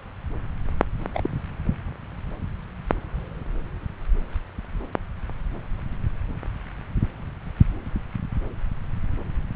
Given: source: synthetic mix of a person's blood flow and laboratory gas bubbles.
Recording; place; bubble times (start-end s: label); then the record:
Doppler ultrasound of blood flow; subclavian vein
1.14-1.29 s: bubbles
From the record:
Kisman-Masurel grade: 111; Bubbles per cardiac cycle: 1 to 2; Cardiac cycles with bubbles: 1 to 10%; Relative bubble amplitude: barely perceptible (0.100 to 0.250); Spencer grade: 1 (occasional bubble signal discernible with the cardiac motion signal, with majority of cardiac periods free of bubbles); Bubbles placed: anywhere in the cardiac cycle